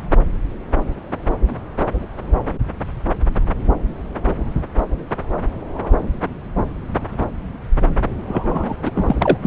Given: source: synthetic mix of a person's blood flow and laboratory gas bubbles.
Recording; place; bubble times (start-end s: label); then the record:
Doppler ultrasound of blood flow; subclavian vein
8.28-8.76 s: bubbles
8.85-8.91 s: bubbles
8.95-9.15 s: bubbles
9.18-9.37 s: bubbles
9.42-9.47 s: bubbles
From the record:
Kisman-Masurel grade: 213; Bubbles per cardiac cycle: several, 3 to 8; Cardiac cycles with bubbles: 1 to 10%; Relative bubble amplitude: loud (0.450 to 0.775); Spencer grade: 1 (occasional bubble signal discernible with the cardiac motion signal, with majority of cardiac periods free of bubbles); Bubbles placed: anywhere in the cardiac cycle